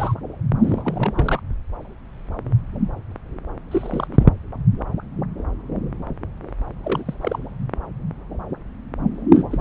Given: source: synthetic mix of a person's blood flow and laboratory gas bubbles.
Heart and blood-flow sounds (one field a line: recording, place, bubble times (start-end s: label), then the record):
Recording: Doppler ultrasound of blood flow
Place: subclavian vein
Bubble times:
0.00-0.15 s: bubbles
0.62-0.82 s: bubbles
0.84-1.41 s: bubbles
3.71-4.17 s: bubbles
4.20-4.25 s: bubbles
6.83-7.14 s: bubbles
7.21-7.39 s: bubbles
9.32-9.43 s: bubbles
9.52-9.61 s: bubbles
From the record:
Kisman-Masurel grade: 221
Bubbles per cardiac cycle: several, 3 to 8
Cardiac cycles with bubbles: 10 to 50%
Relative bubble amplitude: barely perceptible (0.100 to 0.250)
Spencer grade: 2 (many but less than half of the cardiac periods contain bubble signals, singularly or in groups)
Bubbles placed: anywhere in the cardiac cycle